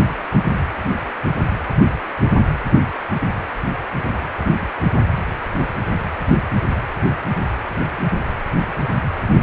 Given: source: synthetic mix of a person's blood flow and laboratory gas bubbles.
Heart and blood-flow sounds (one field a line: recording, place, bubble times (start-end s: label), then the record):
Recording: Doppler ultrasound of blood flow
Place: precordium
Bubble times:
no bubbles
From the record:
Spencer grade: 0 (complete lack of bubble signals)